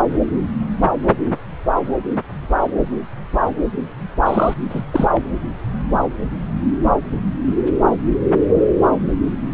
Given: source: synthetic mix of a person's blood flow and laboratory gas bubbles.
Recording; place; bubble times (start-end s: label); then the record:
Doppler ultrasound of blood flow; subclavian vein
4.25-4.54 s: bubbles
4.70-4.82 s: bubbles
4.92-5.08 s: bubbles
5.13-5.21 s: bubbles
From the record:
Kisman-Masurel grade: 212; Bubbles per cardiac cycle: several, 3 to 8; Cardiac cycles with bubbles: 1 to 10%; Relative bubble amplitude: moderate (0.250 to 0.450); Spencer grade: 1 (occasional bubble signal discernible with the cardiac motion signal, with majority of cardiac periods free of bubbles); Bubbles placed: anywhere in the cardiac cycle